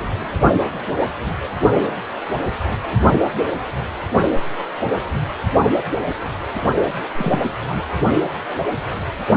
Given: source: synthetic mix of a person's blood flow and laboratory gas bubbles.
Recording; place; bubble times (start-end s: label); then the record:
Doppler ultrasound of blood flow; precordium
7.17-7.40 s: bubbles
7.68-7.88 s: bubbles
From the record:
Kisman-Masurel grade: 112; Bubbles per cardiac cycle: 1 to 2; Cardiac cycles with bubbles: 1 to 10%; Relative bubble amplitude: moderate (0.250 to 0.450); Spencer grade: 1 (occasional bubble signal discernible with the cardiac motion signal, with majority of cardiac periods free of bubbles); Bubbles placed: only in the low amplitude regions of the cardiac cycle